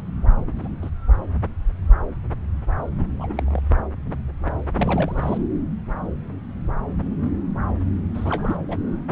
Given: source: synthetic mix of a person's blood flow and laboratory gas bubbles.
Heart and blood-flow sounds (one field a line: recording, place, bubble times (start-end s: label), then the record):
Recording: Doppler ultrasound of blood flow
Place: subclavian vein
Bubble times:
0.47-0.53 s: bubbles
0.56-0.68 s: bubbles
0.81-0.90 s: bubbles
2.99-3.03 s: bubbles
3.19-3.61 s: bubbles
4.78-5.38 s: bubbles
8.14-8.56 s: bubbles
8.68-8.77 s: bubbles
From the record:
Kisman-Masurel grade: 221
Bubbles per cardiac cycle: several, 3 to 8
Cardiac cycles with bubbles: 10 to 50%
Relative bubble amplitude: barely perceptible (0.100 to 0.250)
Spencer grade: 2 (many but less than half of the cardiac periods contain bubble signals, singularly or in groups)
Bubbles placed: anywhere in the cardiac cycle